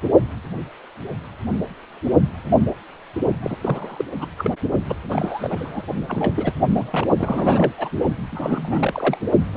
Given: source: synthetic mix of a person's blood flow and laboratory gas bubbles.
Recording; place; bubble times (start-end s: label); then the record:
Doppler ultrasound of blood flow; precordium
0.02-0.09 s: bubbles
3.42-3.56 s: bubbles
3.62-4.05 s: bubbles
4.19-4.26 s: bubbles
4.38-4.50 s: bubbles
4.89-4.96 s: bubbles
5.08-5.82 s: bubbles
6.08-6.53 s: bubbles
6.71-7.06 s: bubbles
7.19-7.75 s: bubbles
7.78-7.89 s: bubbles
8.31-9.18 s: bubbles
9.54-9.57 s: bubbles
From the record:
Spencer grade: 3 (all of the cardiac periods contain showers or single bubble signals, but not dominating or overriding the cardiac motion signals); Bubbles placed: only in the low amplitude regions of the cardiac cycle